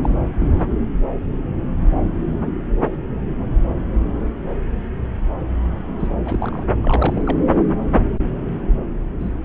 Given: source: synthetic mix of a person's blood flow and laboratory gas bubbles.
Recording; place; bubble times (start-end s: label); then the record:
Doppler ultrasound of blood flow; subclavian vein
0.00-0.09 s: bubbles
0.40-0.68 s: bubbles
5.99-6.12 s: bubbles
6.25-6.66 s: bubbles
6.82-7.21 s: bubbles
7.26-7.37 s: bubbles
9.19-9.32 s: bubbles
From the record:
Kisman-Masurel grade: 221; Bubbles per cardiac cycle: several, 3 to 8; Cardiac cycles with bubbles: 10 to 50%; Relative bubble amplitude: barely perceptible (0.100 to 0.250); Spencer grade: 2 (many but less than half of the cardiac periods contain bubble signals, singularly or in groups); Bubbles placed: anywhere in the cardiac cycle